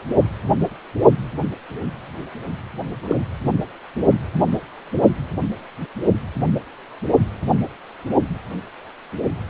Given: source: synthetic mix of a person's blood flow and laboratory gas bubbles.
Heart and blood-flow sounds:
Doppler ultrasound of blood flow; precordium
3.02-3.16 s: bubbles
From the record:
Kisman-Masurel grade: 122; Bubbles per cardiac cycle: 1 to 2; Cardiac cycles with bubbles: 10 to 50%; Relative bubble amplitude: moderate (0.250 to 0.450); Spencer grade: 2 (many but less than half of the cardiac periods contain bubble signals, singularly or in groups); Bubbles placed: only in the low amplitude regions of the cardiac cycle

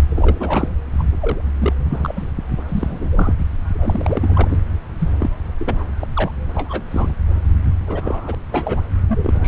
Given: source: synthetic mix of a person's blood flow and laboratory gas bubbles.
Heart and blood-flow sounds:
Doppler ultrasound of blood flow; subclavian vein
0.10-0.69 s: bubbles
0.99-1.03 s: bubbles
1.20-1.41 s: bubbles
1.58-1.73 s: bubbles
1.90-2.31 s: bubbles
2.68-3.34 s: bubbles
3.73-4.57 s: bubbles
4.99-5.14 s: bubbles
5.20-5.30 s: bubbles
5.60-5.84 s: bubbles
5.99-6.07 s: bubbles
6.15-6.31 s: bubbles
6.54-6.82 s: bubbles
6.90-7.15 s: bubbles
7.79-8.35 s: bubbles
8.51-8.81 s: bubbles
9.08-9.48 s: bubbles
From the record:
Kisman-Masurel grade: 242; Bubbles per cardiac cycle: several, 3 to 8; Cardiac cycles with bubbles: 100%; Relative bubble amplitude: moderate (0.250 to 0.450); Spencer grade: 3 (all of the cardiac periods contain showers or single bubble signals, but not dominating or overriding the cardiac motion signals); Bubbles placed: anywhere in the cardiac cycle

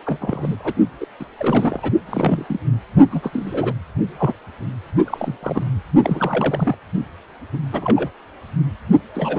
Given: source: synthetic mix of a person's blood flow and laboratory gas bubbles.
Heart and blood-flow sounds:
Doppler ultrasound of blood flow; precordium
0.05-0.74 s: bubbles
1.00-1.06 s: bubbles
1.19-1.26 s: bubbles
1.38-1.92 s: bubbles
2.06-2.45 s: bubbles
2.48-2.59 s: bubbles
3.10-3.74 s: bubbles
4.19-4.33 s: bubbles
5.06-5.36 s: bubbles
5.43-5.68 s: bubbles
6.03-6.75 s: bubbles
7.53-7.58 s: bubbles
7.72-8.09 s: bubbles
9.14-9.38 s: bubbles
From the record:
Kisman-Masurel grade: 242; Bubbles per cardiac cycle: several, 3 to 8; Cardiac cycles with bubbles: 100%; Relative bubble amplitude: moderate (0.250 to 0.450); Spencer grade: 3 (all of the cardiac periods contain showers or single bubble signals, but not dominating or overriding the cardiac motion signals); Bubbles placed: only in the low amplitude regions of the cardiac cycle

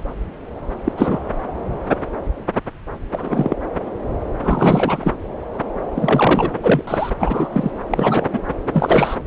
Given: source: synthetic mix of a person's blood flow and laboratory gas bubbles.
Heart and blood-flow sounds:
Doppler ultrasound of blood flow; subclavian vein
0.84-0.92 s: bubbles
0.97-1.20 s: bubbles
3.11-3.55 s: bubbles
4.42-5.13 s: bubbles
5.95-6.51 s: bubbles
6.62-6.81 s: bubbles
6.87-7.10 s: bubbles
7.18-7.48 s: bubbles
7.52-7.71 s: bubbles
7.90-8.27 s: bubbles
8.32-8.40 s: bubbles
8.73-9.16 s: bubbles
From the record:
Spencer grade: 2 (many but less than half of the cardiac periods contain bubble signals, singularly or in groups); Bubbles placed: anywhere in the cardiac cycle

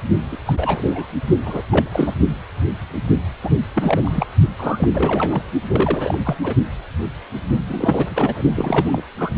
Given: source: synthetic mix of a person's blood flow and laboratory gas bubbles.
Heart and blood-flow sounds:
Doppler ultrasound of blood flow; precordium
0.31-0.38 s: bubbles
0.46-1.12 s: bubbles
1.45-1.66 s: bubbles
1.71-2.14 s: bubbles
3.43-3.50 s: bubbles
3.74-4.27 s: bubbles
4.58-4.88 s: bubbles
4.93-5.42 s: bubbles
5.71-6.18 s: bubbles
6.24-6.35 s: bubbles
6.43-6.54 s: bubbles
7.67-8.42 s: bubbles
8.55-9.03 s: bubbles
9.17-9.30 s: bubbles
From the record:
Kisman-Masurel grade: 333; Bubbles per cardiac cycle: rolling drumbeat, 9 or more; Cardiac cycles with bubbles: 50 to 99%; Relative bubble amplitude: loud (0.450 to 0.775); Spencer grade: 3 (all of the cardiac periods contain showers or single bubble signals, but not dominating or overriding the cardiac motion signals); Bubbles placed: only in the low amplitude regions of the cardiac cycle

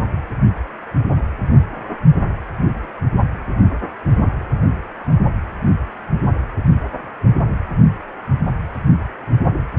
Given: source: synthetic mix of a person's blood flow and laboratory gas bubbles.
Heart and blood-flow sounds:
Doppler ultrasound of blood flow; precordium
no bubbles
From the record:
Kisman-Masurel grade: 000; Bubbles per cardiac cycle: 0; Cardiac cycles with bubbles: 0%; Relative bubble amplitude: no bubbles discernible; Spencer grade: 0 (complete lack of bubble signals)

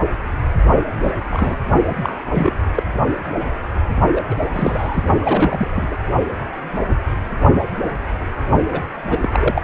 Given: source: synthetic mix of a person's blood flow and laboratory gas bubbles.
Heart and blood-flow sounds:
Doppler ultrasound of blood flow; precordium
1.03-1.12 s: bubbles
1.29-1.56 s: bubbles
2.03-2.23 s: bubbles
2.31-2.52 s: bubbles
2.75-2.83 s: bubbles
4.15-4.21 s: bubbles
4.30-4.36 s: bubbles
4.49-5.04 s: bubbles
5.21-5.70 s: bubbles
5.76-5.88 s: bubbles
5.91-5.97 s: bubbles
8.72-8.80 s: bubbles
9.10-9.18 s: bubbles
9.22-9.29 s: bubbles
9.32-9.62 s: bubbles
From the record:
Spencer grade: 3 (all of the cardiac periods contain showers or single bubble signals, but not dominating or overriding the cardiac motion signals); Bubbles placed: only in the low amplitude regions of the cardiac cycle

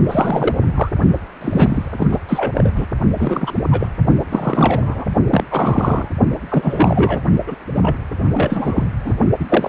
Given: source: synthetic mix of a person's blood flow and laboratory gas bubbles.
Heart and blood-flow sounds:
Doppler ultrasound of blood flow; precordium
0.07-0.54 s: bubbles
0.60-0.68 s: bubbles
0.74-0.89 s: bubbles
1.41-2.07 s: bubbles
2.10-2.19 s: bubbles
2.29-2.52 s: bubbles
2.54-2.71 s: bubbles
2.75-2.86 s: bubbles
3.14-3.62 s: bubbles
3.71-3.88 s: bubbles
4.29-5.06 s: bubbles
5.31-5.44 s: bubbles
5.51-6.09 s: bubbles
6.51-7.21 s: bubbles
7.47-7.56 s: bubbles
7.75-7.97 s: bubbles
8.34-8.87 s: bubbles
9.04-9.13 s: bubbles
9.39-9.46 s: bubbles
9.49-9.69 s: bubbles
From the record:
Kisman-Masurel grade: 343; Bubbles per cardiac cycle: rolling drumbeat, 9 or more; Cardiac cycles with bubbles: 100%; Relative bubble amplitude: loud (0.450 to 0.775); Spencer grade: 3 (all of the cardiac periods contain showers or single bubble signals, but not dominating or overriding the cardiac motion signals); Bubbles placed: only in the low amplitude regions of the cardiac cycle

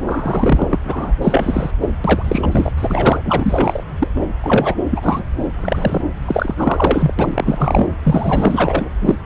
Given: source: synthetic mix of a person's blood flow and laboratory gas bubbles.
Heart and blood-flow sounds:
Doppler ultrasound of blood flow; subclavian vein
0.06-0.79 s: bubbles
0.84-1.13 s: bubbles
1.22-1.71 s: bubbles
1.81-1.92 s: bubbles
2.04-2.72 s: bubbles
2.76-3.83 s: bubbles
3.98-4.08 s: bubbles
4.16-4.27 s: bubbles
4.42-4.75 s: bubbles
4.90-5.23 s: bubbles
5.60-6.01 s: bubbles
6.25-7.13 s: bubbles
7.18-7.90 s: bubbles
8.03-8.90 s: bubbles
9.02-9.15 s: bubbles
From the record:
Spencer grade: 4 (maximum detectable bubble signal sounding continuously throughout systole and diastole of every cardiac period, and overriding the amplitude of the normal cardiac signals); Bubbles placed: anywhere in the cardiac cycle

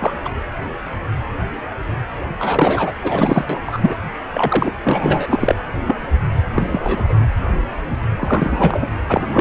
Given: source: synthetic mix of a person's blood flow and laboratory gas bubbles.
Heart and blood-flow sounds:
Doppler ultrasound of blood flow; precordium
0.00-0.13 s: bubbles
0.24-0.35 s: bubbles
2.39-2.93 s: bubbles
3.02-3.45 s: bubbles
3.49-3.59 s: bubbles
3.66-3.95 s: bubbles
4.32-4.71 s: bubbles
4.83-5.55 s: bubbles
5.87-5.96 s: bubbles
6.54-7.15 s: bubbles
8.20-8.88 s: bubbles
9.09-9.28 s: bubbles
9.33-9.41 s: bubbles
From the record:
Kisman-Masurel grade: 233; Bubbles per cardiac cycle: several, 3 to 8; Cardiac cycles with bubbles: 50 to 99%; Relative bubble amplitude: loud (0.450 to 0.775); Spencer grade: 3 (all of the cardiac periods contain showers or single bubble signals, but not dominating or overriding the cardiac motion signals); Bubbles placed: anywhere in the cardiac cycle

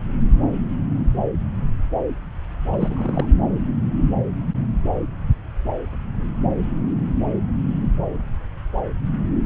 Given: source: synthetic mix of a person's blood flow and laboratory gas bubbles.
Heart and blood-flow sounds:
Doppler ultrasound of blood flow; subclavian vein
2.72-3.25 s: bubbles
From the record:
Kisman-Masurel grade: 211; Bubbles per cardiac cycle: several, 3 to 8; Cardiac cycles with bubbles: 1 to 10%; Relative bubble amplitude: barely perceptible (0.100 to 0.250); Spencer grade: 1 (occasional bubble signal discernible with the cardiac motion signal, with majority of cardiac periods free of bubbles); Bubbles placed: anywhere in the cardiac cycle

